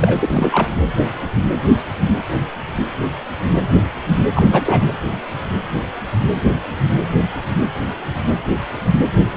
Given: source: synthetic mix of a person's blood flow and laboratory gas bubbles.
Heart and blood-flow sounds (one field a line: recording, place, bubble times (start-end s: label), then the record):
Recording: Doppler ultrasound of blood flow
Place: precordium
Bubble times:
0.00-0.68 s: bubbles
4.34-4.83 s: bubbles
From the record:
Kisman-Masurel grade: 222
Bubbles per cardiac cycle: several, 3 to 8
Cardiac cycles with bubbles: 10 to 50%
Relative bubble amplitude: moderate (0.250 to 0.450)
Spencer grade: 2 (many but less than half of the cardiac periods contain bubble signals, singularly or in groups)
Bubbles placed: anywhere in the cardiac cycle